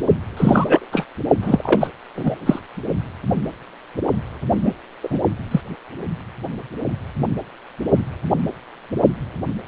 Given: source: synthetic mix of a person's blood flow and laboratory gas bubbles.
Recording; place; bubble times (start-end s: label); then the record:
Doppler ultrasound of blood flow; precordium
0.36-0.85 s: bubbles
0.92-1.05 s: bubbles
1.42-1.88 s: bubbles
2.15-2.35 s: bubbles
2.46-2.60 s: bubbles
4.63-4.73 s: bubbles
5.03-5.18 s: bubbles
5.51-5.61 s: bubbles
From the record:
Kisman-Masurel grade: 223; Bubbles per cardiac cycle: several, 3 to 8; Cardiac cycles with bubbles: 10 to 50%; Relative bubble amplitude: loud (0.450 to 0.775); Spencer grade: 2 (many but less than half of the cardiac periods contain bubble signals, singularly or in groups); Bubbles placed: only in the low amplitude regions of the cardiac cycle